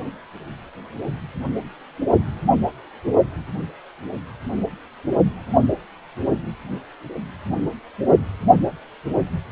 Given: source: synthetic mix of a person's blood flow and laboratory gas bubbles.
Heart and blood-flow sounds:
Doppler ultrasound of blood flow; precordium
no bubbles
From the record:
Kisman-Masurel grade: 000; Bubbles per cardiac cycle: 0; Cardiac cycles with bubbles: 0%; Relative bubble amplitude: no bubbles discernible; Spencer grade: 0 (complete lack of bubble signals)

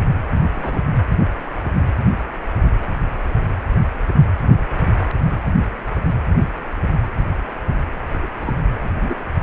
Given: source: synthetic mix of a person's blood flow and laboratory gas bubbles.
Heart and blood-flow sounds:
Doppler ultrasound of blood flow; precordium
0.55-0.82 s: bubbles
8.22-8.27 s: bubbles
8.43-8.54 s: bubbles
9.00-9.16 s: bubbles
From the record:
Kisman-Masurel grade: 121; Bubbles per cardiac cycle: 1 to 2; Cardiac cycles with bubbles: 10 to 50%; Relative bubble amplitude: barely perceptible (0.100 to 0.250); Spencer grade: 2 (many but less than half of the cardiac periods contain bubble signals, singularly or in groups); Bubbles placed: anywhere in the cardiac cycle

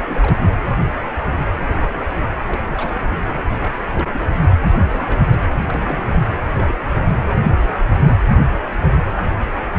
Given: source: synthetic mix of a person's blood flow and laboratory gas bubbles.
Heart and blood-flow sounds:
Doppler ultrasound of blood flow; precordium
0.06-0.40 s: bubbles
1.67-1.93 s: bubbles
1.96-2.02 s: bubbles
2.21-2.29 s: bubbles
2.46-2.57 s: bubbles
2.72-2.75 s: bubbles
2.77-3.42 s: bubbles
3.60-3.72 s: bubbles
3.92-4.25 s: bubbles
4.35-4.49 s: bubbles
4.58-4.62 s: bubbles
4.89-5.42 s: bubbles
5.53-6.05 s: bubbles
6.11-6.20 s: bubbles
6.51-6.75 s: bubbles
6.83-6.88 s: bubbles
6.91-7.05 s: bubbles
7.12-7.18 s: bubbles
From the record:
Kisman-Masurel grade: 221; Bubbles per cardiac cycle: several, 3 to 8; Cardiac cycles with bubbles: 10 to 50%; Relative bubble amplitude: barely perceptible (0.100 to 0.250); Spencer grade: 2 (many but less than half of the cardiac periods contain bubble signals, singularly or in groups); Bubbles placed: anywhere in the cardiac cycle

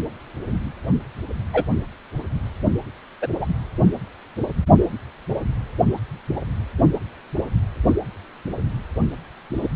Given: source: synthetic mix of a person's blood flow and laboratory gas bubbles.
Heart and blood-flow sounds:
Doppler ultrasound of blood flow; precordium
1.53-1.64 s: bubbles
3.21-3.28 s: bubbles
3.41-3.46 s: bubbles
9.58-9.69 s: bubbles
From the record:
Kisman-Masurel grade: 123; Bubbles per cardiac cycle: 1 to 2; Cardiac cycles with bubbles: 10 to 50%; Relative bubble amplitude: loud (0.450 to 0.775); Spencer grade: 2 (many but less than half of the cardiac periods contain bubble signals, singularly or in groups); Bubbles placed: anywhere in the cardiac cycle

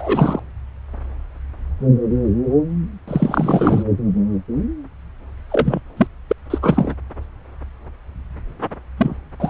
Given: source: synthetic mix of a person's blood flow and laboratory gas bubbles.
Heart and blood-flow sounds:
Doppler ultrasound of blood flow; subclavian vein
0.00-0.40 s: bubbles
3.08-3.83 s: bubbles
5.49-5.80 s: bubbles
5.97-6.07 s: bubbles
6.28-6.32 s: bubbles
6.50-6.58 s: bubbles
6.62-6.94 s: bubbles
8.97-9.16 s: bubbles
9.40-9.50 s: bubbles
From the record:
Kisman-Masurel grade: 223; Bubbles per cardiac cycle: several, 3 to 8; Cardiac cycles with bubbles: 10 to 50%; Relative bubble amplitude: loud (0.450 to 0.775); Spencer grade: 2 (many but less than half of the cardiac periods contain bubble signals, singularly or in groups); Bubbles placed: anywhere in the cardiac cycle

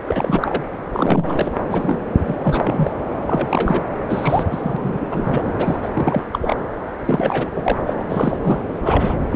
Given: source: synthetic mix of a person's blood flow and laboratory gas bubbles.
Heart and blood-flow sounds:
Doppler ultrasound of blood flow; subclavian vein
0.05-0.64 s: bubbles
0.94-1.52 s: bubbles
1.70-1.99 s: bubbles
2.26-2.35 s: bubbles
2.43-2.92 s: bubbles
3.26-3.83 s: bubbles
4.08-4.44 s: bubbles
4.50-5.08 s: bubbles
5.10-5.53 s: bubbles
5.58-5.79 s: bubbles
5.82-5.89 s: bubbles
5.94-6.27 s: bubbles
6.33-6.39 s: bubbles
6.41-6.57 s: bubbles
7.06-7.50 s: bubbles
7.55-7.77 s: bubbles
7.86-7.93 s: bubbles
8.00-8.04 s: bubbles
8.09-8.38 s: bubbles
8.43-8.62 s: bubbles
8.84-9.18 s: bubbles
9.30-9.36 s: bubbles
From the record:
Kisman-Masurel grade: 343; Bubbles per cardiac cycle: rolling drumbeat, 9 or more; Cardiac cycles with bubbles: 100%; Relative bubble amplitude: loud (0.450 to 0.775); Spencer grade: 3 (all of the cardiac periods contain showers or single bubble signals, but not dominating or overriding the cardiac motion signals); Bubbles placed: anywhere in the cardiac cycle

